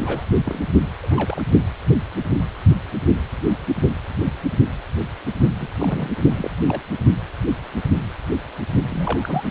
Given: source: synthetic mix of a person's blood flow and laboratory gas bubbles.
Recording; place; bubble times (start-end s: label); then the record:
Doppler ultrasound of blood flow; precordium
0.01-0.24 s: bubbles
0.45-0.60 s: bubbles
1.04-1.08 s: bubbles
1.10-1.44 s: bubbles
5.60-5.68 s: bubbles
5.80-6.09 s: bubbles
6.31-6.51 s: bubbles
6.68-6.81 s: bubbles
8.90-9.49 s: bubbles
From the record:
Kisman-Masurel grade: 221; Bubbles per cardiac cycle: several, 3 to 8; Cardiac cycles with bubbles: 10 to 50%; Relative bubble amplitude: barely perceptible (0.100 to 0.250); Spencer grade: 2 (many but less than half of the cardiac periods contain bubble signals, singularly or in groups); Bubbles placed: only in the low amplitude regions of the cardiac cycle